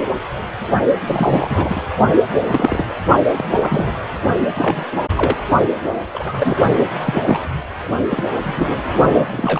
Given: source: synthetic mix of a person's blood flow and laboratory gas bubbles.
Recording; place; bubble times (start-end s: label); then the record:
Doppler ultrasound of blood flow; precordium
1.07-1.81 s: bubbles
2.50-2.85 s: bubbles
3.26-3.44 s: bubbles
3.51-3.95 s: bubbles
4.54-4.86 s: bubbles
4.92-4.97 s: bubbles
5.16-5.37 s: bubbles
6.14-6.56 s: bubbles
7.06-7.50 s: bubbles
8.10-8.23 s: bubbles
8.43-8.71 s: bubbles
9.16-9.60 s: bubbles
From the record:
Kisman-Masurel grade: 232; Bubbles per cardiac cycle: several, 3 to 8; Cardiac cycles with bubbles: 50 to 99%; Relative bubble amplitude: moderate (0.250 to 0.450); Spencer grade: 3 (all of the cardiac periods contain showers or single bubble signals, but not dominating or overriding the cardiac motion signals); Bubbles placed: only in the low amplitude regions of the cardiac cycle